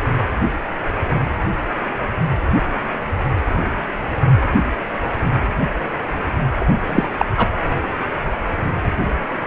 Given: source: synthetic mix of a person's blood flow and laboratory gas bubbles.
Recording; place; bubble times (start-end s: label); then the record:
Doppler ultrasound of blood flow; precordium
6.60-6.65 s: bubbles
6.89-7.10 s: bubbles
7.17-7.25 s: bubbles
7.37-7.48 s: bubbles
From the record:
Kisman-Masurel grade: 213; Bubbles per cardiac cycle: several, 3 to 8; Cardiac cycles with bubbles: 1 to 10%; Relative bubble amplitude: loud (0.450 to 0.775); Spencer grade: 1 (occasional bubble signal discernible with the cardiac motion signal, with majority of cardiac periods free of bubbles); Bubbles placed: anywhere in the cardiac cycle